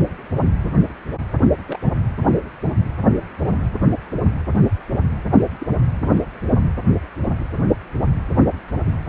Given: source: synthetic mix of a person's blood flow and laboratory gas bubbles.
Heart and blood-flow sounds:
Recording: Doppler ultrasound of blood flow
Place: precordium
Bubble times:
1.67-1.79 s: bubbles
2.28-2.36 s: bubbles
5.32-5.41 s: bubbles
5.58-5.67 s: bubbles
From the record:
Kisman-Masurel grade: 121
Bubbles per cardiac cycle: 1 to 2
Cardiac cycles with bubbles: 10 to 50%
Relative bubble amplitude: barely perceptible (0.100 to 0.250)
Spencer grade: 2 (many but less than half of the cardiac periods contain bubble signals, singularly or in groups)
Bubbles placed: anywhere in the cardiac cycle

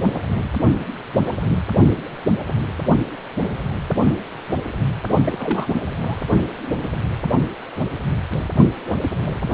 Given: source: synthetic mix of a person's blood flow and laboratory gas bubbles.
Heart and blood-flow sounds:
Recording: Doppler ultrasound of blood flow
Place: precordium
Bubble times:
5.25-5.68 s: bubbles
5.96-6.17 s: bubbles
From the record:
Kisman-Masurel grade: 212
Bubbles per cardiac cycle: several, 3 to 8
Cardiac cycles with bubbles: 1 to 10%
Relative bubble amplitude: moderate (0.250 to 0.450)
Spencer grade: 1 (occasional bubble signal discernible with the cardiac motion signal, with majority of cardiac periods free of bubbles)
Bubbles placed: only in the low amplitude regions of the cardiac cycle

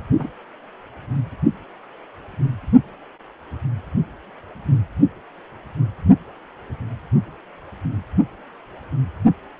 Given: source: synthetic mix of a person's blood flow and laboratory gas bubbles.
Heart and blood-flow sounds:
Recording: Doppler ultrasound of blood flow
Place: precordium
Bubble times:
0.19-0.29 s: bubbles
From the record:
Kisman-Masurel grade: 113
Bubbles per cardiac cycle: 1 to 2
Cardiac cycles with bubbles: 1 to 10%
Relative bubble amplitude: loud (0.450 to 0.775)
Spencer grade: 1 (occasional bubble signal discernible with the cardiac motion signal, with majority of cardiac periods free of bubbles)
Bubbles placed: only in the low amplitude regions of the cardiac cycle

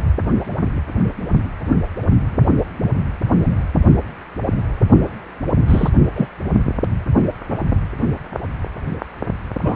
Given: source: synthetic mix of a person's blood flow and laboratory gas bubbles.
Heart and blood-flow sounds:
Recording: Doppler ultrasound of blood flow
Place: precordium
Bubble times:
5.68-5.89 s: bubbles
6.16-6.28 s: bubbles
9.61-9.76 s: bubbles
From the record:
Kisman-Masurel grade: 123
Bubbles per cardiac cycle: 1 to 2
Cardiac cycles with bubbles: 10 to 50%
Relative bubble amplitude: loud (0.450 to 0.775)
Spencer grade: 2 (many but less than half of the cardiac periods contain bubble signals, singularly or in groups)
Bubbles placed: only in the low amplitude regions of the cardiac cycle

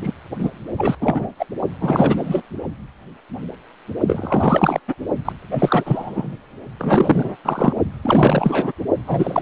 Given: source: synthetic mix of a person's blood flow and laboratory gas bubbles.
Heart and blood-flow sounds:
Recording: Doppler ultrasound of blood flow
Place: precordium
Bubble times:
0.01-0.11 s: bubbles
0.39-0.49 s: bubbles
0.77-0.95 s: bubbles
1.00-1.27 s: bubbles
1.39-1.45 s: bubbles
1.80-2.42 s: bubbles
4.07-4.80 s: bubbles
4.88-4.95 s: bubbles
5.25-5.33 s: bubbles
5.51-6.36 s: bubbles
6.79-7.37 s: bubbles
7.45-7.73 s: bubbles
8.02-8.72 s: bubbles
9.06-9.42 s: bubbles
From the record:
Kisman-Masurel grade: 333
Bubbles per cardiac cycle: rolling drumbeat, 9 or more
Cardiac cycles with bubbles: 50 to 99%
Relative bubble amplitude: loud (0.450 to 0.775)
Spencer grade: 3 (all of the cardiac periods contain showers or single bubble signals, but not dominating or overriding the cardiac motion signals)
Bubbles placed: only in the low amplitude regions of the cardiac cycle

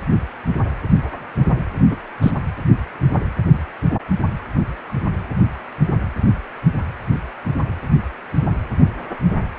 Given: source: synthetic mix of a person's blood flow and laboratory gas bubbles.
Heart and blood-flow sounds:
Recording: Doppler ultrasound of blood flow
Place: precordium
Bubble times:
1.91-1.96 s: bubbles
2.22-2.31 s: bubbles
From the record:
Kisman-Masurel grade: 113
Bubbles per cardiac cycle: 1 to 2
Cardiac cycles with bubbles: 1 to 10%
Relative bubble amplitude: loud (0.450 to 0.775)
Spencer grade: 1 (occasional bubble signal discernible with the cardiac motion signal, with majority of cardiac periods free of bubbles)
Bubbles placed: anywhere in the cardiac cycle

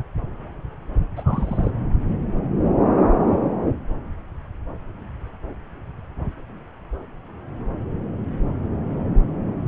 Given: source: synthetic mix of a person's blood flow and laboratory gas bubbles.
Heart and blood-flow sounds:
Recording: Doppler ultrasound of blood flow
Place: subclavian vein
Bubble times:
1.16-1.71 s: bubbles
From the record:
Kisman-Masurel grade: 211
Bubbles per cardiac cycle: several, 3 to 8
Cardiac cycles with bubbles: 1 to 10%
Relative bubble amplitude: barely perceptible (0.100 to 0.250)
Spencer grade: 1 (occasional bubble signal discernible with the cardiac motion signal, with majority of cardiac periods free of bubbles)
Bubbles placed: anywhere in the cardiac cycle

